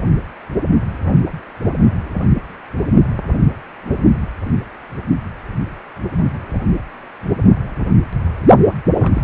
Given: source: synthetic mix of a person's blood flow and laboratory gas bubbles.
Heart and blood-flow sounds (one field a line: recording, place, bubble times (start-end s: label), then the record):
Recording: Doppler ultrasound of blood flow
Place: precordium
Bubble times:
9.00-9.22 s: bubbles
From the record:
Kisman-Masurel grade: 212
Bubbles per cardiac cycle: several, 3 to 8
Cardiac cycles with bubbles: 1 to 10%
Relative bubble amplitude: moderate (0.250 to 0.450)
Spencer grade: 1 (occasional bubble signal discernible with the cardiac motion signal, with majority of cardiac periods free of bubbles)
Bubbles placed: only in the low amplitude regions of the cardiac cycle